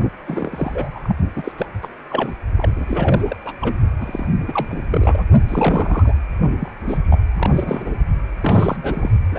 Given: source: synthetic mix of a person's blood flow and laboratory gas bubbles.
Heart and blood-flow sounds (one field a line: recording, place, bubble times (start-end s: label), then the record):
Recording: Doppler ultrasound of blood flow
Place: precordium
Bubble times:
0.27-0.99 s: bubbles
1.03-1.15 s: bubbles
1.36-1.52 s: bubbles
1.57-1.66 s: bubbles
1.82-1.88 s: bubbles
2.10-2.32 s: bubbles
2.57-2.70 s: bubbles
2.75-3.34 s: bubbles
3.45-3.54 s: bubbles
3.61-3.75 s: bubbles
4.00-4.26 s: bubbles
4.47-4.65 s: bubbles
4.68-4.85 s: bubbles
4.90-5.23 s: bubbles
5.48-6.14 s: bubbles
6.59-6.71 s: bubbles
6.88-6.97 s: bubbles
7.10-7.19 s: bubbles
7.36-7.96 s: bubbles
8.41-8.77 s: bubbles
8.83-9.09 s: bubbles
9.31-9.39 s: bubbles
From the record:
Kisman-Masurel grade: 342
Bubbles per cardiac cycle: rolling drumbeat, 9 or more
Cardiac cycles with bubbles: 100%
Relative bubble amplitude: moderate (0.250 to 0.450)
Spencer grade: 3 (all of the cardiac periods contain showers or single bubble signals, but not dominating or overriding the cardiac motion signals)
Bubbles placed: only in the low amplitude regions of the cardiac cycle